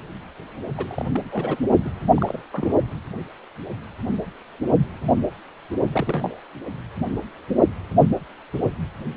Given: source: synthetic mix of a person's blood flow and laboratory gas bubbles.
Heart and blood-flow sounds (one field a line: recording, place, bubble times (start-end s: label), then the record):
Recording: Doppler ultrasound of blood flow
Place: precordium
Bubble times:
0.77-1.04 s: bubbles
1.11-1.21 s: bubbles
1.31-1.69 s: bubbles
1.84-1.90 s: bubbles
2.15-2.42 s: bubbles
2.53-2.73 s: bubbles
5.92-6.40 s: bubbles
From the record:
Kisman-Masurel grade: 221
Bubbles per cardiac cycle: several, 3 to 8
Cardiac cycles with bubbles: 10 to 50%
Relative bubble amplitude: barely perceptible (0.100 to 0.250)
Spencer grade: 2 (many but less than half of the cardiac periods contain bubble signals, singularly or in groups)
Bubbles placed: only in the low amplitude regions of the cardiac cycle